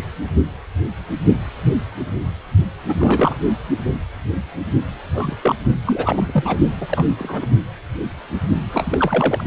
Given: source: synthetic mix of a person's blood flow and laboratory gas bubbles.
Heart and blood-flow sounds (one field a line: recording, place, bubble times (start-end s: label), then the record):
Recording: Doppler ultrasound of blood flow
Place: precordium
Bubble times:
0.00-0.04 s: bubbles
2.88-3.37 s: bubbles
5.14-5.37 s: bubbles
5.42-5.56 s: bubbles
5.86-6.57 s: bubbles
6.81-6.87 s: bubbles
6.89-7.06 s: bubbles
7.19-7.47 s: bubbles
8.67-9.43 s: bubbles
From the record:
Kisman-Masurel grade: 232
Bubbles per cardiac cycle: several, 3 to 8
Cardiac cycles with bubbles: 50 to 99%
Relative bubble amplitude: moderate (0.250 to 0.450)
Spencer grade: 3 (all of the cardiac periods contain showers or single bubble signals, but not dominating or overriding the cardiac motion signals)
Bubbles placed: only in the low amplitude regions of the cardiac cycle